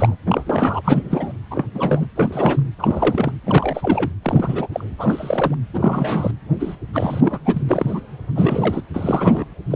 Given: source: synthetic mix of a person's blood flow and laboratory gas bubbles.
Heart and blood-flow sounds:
Doppler ultrasound of blood flow; precordium
0.00-0.15 s: bubbles
0.26-0.42 s: bubbles
0.46-0.81 s: bubbles
0.84-1.33 s: bubbles
1.50-1.67 s: bubbles
1.74-2.06 s: bubbles
2.16-2.62 s: bubbles
2.79-3.32 s: bubbles
3.45-4.11 s: bubbles
4.22-4.67 s: bubbles
4.73-4.85 s: bubbles
4.98-5.54 s: bubbles
5.74-6.31 s: bubbles
6.60-6.76 s: bubbles
6.94-7.39 s: bubbles
7.45-7.62 s: bubbles
7.69-8.01 s: bubbles
8.35-8.81 s: bubbles
8.94-9.45 s: bubbles
9.70-9.76 s: bubbles
From the record:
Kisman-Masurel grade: 342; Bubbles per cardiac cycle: rolling drumbeat, 9 or more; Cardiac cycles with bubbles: 100%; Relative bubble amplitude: moderate (0.250 to 0.450); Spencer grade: 3 (all of the cardiac periods contain showers or single bubble signals, but not dominating or overriding the cardiac motion signals); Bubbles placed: anywhere in the cardiac cycle

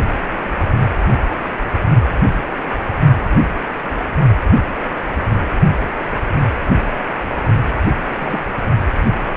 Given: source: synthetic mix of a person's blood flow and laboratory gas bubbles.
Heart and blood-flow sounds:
Doppler ultrasound of blood flow; precordium
8.12-8.40 s: bubbles
From the record:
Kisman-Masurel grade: 111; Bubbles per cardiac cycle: 1 to 2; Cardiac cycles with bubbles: 1 to 10%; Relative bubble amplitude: barely perceptible (0.100 to 0.250); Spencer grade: 1 (occasional bubble signal discernible with the cardiac motion signal, with majority of cardiac periods free of bubbles); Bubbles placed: only in the low amplitude regions of the cardiac cycle

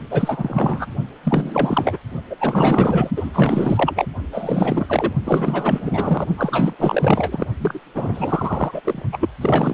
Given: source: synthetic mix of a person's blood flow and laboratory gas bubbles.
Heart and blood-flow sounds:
Doppler ultrasound of blood flow; precordium
0.10-0.86 s: bubbles
1.23-1.99 s: bubbles
2.29-2.36 s: bubbles
2.40-3.11 s: bubbles
3.17-3.30 s: bubbles
3.33-4.06 s: bubbles
4.32-5.13 s: bubbles
5.24-6.27 s: bubbles
6.37-6.76 s: bubbles
6.79-7.46 s: bubbles
7.59-7.80 s: bubbles
7.94-8.81 s: bubbles
8.84-9.03 s: bubbles
9.12-9.29 s: bubbles
9.40-9.74 s: bubbles
From the record:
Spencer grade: 4 (maximum detectable bubble signal sounding continuously throughout systole and diastole of every cardiac period, and overriding the amplitude of the normal cardiac signals); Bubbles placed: only in the low amplitude regions of the cardiac cycle

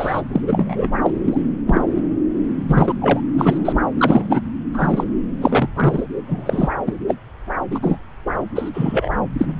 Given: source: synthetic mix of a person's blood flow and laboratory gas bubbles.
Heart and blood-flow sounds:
Doppler ultrasound of blood flow; subclavian vein
0.00-0.21 s: bubbles
0.33-0.41 s: bubbles
0.46-0.88 s: bubbles
1.03-1.10 s: bubbles
1.28-1.37 s: bubbles
1.67-1.82 s: bubbles
2.68-2.94 s: bubbles
3.00-3.21 s: bubbles
3.34-3.79 s: bubbles
3.96-4.41 s: bubbles
4.73-5.04 s: bubbles
5.41-5.68 s: bubbles
5.76-6.03 s: bubbles
6.27-6.72 s: bubbles
6.87-6.93 s: bubbles
7.07-7.14 s: bubbles
7.71-7.97 s: bubbles
8.55-8.70 s: bubbles
8.73-9.09 s: bubbles
9.38-9.46 s: bubbles
From the record:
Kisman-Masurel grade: 233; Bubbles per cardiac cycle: several, 3 to 8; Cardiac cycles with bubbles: 50 to 99%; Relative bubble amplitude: loud (0.450 to 0.775); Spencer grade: 3 (all of the cardiac periods contain showers or single bubble signals, but not dominating or overriding the cardiac motion signals); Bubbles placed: anywhere in the cardiac cycle

